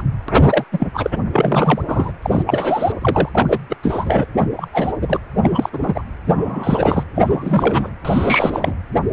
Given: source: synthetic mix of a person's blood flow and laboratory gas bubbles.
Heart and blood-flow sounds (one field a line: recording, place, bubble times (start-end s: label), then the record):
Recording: Doppler ultrasound of blood flow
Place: precordium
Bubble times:
0.00-0.03 s: bubbles
0.28-0.33 s: bubbles
0.44-0.64 s: bubbles
0.72-0.88 s: bubbles
0.93-1.10 s: bubbles
1.33-1.82 s: bubbles
1.87-2.11 s: bubbles
2.22-2.42 s: bubbles
2.46-2.92 s: bubbles
3.01-3.29 s: bubbles
3.34-3.59 s: bubbles
3.70-3.76 s: bubbles
3.83-4.26 s: bubbles
4.38-4.47 s: bubbles
4.56-4.68 s: bubbles
4.73-4.93 s: bubbles
5.01-5.19 s: bubbles
5.42-5.70 s: bubbles
5.72-6.03 s: bubbles
6.26-7.04 s: bubbles
7.15-7.89 s: bubbles
8.04-8.75 s: bubbles
From the record:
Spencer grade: 3 (all of the cardiac periods contain showers or single bubble signals, but not dominating or overriding the cardiac motion signals)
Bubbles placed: anywhere in the cardiac cycle